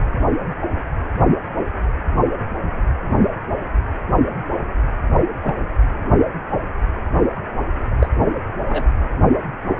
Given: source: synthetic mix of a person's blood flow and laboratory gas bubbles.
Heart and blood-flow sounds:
Doppler ultrasound of blood flow; precordium
5.43-5.55 s: bubbles
7.99-8.09 s: bubbles
8.68-8.87 s: bubbles
From the record:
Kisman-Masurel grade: 122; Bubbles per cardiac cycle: 1 to 2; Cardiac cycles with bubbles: 10 to 50%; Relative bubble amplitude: moderate (0.250 to 0.450); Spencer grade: 2 (many but less than half of the cardiac periods contain bubble signals, singularly or in groups); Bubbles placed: anywhere in the cardiac cycle

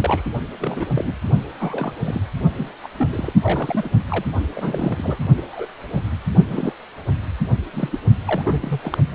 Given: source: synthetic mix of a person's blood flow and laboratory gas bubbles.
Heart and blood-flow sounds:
Doppler ultrasound of blood flow; precordium
0.00-0.22 s: bubbles
0.59-0.85 s: bubbles
0.94-1.15 s: bubbles
1.59-1.92 s: bubbles
1.99-2.21 s: bubbles
2.57-2.72 s: bubbles
2.83-2.88 s: bubbles
2.98-3.08 s: bubbles
3.12-3.33 s: bubbles
3.43-3.90 s: bubbles
4.09-4.24 s: bubbles
4.55-5.28 s: bubbles
5.37-5.67 s: bubbles
5.93-6.04 s: bubbles
6.48-6.73 s: bubbles
7.72-7.99 s: bubbles
8.25-8.41 s: bubbles
8.45-8.79 s: bubbles
8.82-8.98 s: bubbles
From the record:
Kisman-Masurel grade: 232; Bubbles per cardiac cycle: several, 3 to 8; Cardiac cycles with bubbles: 50 to 99%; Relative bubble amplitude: moderate (0.250 to 0.450); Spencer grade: 3 (all of the cardiac periods contain showers or single bubble signals, but not dominating or overriding the cardiac motion signals); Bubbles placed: only in the low amplitude regions of the cardiac cycle

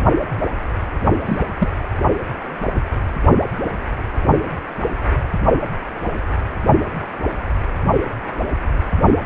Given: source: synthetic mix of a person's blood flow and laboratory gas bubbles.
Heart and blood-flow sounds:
Doppler ultrasound of blood flow; precordium
1.25-1.44 s: bubbles
1.59-1.69 s: bubbles
From the record:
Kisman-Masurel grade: 212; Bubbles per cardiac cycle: several, 3 to 8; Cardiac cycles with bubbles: 1 to 10%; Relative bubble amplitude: moderate (0.250 to 0.450); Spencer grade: 1 (occasional bubble signal discernible with the cardiac motion signal, with majority of cardiac periods free of bubbles); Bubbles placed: only in the low amplitude regions of the cardiac cycle

